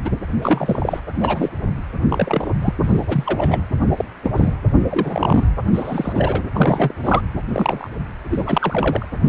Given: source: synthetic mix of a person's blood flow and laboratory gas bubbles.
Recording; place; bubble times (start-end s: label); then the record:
Doppler ultrasound of blood flow; precordium
0.04-0.10 s: bubbles
0.42-1.00 s: bubbles
1.20-1.49 s: bubbles
2.08-2.51 s: bubbles
2.62-2.74 s: bubbles
2.83-3.61 s: bubbles
3.97-4.04 s: bubbles
4.23-4.30 s: bubbles
4.35-4.54 s: bubbles
4.90-5.45 s: bubbles
5.73-6.43 s: bubbles
6.53-6.95 s: bubbles
7.04-7.22 s: bubbles
7.52-7.88 s: bubbles
8.30-9.06 s: bubbles
9.25-9.29 s: bubbles
From the record:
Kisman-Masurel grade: 243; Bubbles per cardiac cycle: several, 3 to 8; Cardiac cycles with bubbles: 100%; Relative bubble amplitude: loud (0.450 to 0.775); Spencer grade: 3 (all of the cardiac periods contain showers or single bubble signals, but not dominating or overriding the cardiac motion signals); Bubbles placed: anywhere in the cardiac cycle